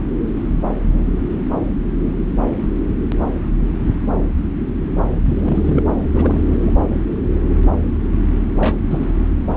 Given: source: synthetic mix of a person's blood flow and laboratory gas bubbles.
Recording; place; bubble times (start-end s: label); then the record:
Doppler ultrasound of blood flow; subclavian vein
0.00-0.05 s: bubbles
5.24-5.83 s: bubbles
6.12-6.42 s: bubbles
6.47-6.73 s: bubbles
8.60-8.76 s: bubbles
8.89-9.12 s: bubbles
From the record:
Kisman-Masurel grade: 222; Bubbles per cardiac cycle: several, 3 to 8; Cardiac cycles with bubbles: 10 to 50%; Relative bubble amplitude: moderate (0.250 to 0.450); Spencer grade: 2 (many but less than half of the cardiac periods contain bubble signals, singularly or in groups); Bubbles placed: anywhere in the cardiac cycle